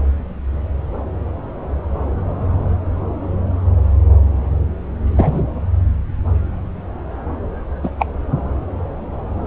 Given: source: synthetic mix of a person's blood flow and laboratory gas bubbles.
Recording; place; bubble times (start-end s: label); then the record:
Doppler ultrasound of blood flow; subclavian vein
5.12-5.42 s: bubbles
7.83-7.90 s: bubbles
7.99-8.06 s: bubbles
From the record:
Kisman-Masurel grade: 123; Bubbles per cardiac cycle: 1 to 2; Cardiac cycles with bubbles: 10 to 50%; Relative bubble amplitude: loud (0.450 to 0.775); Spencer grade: 2 (many but less than half of the cardiac periods contain bubble signals, singularly or in groups); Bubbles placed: anywhere in the cardiac cycle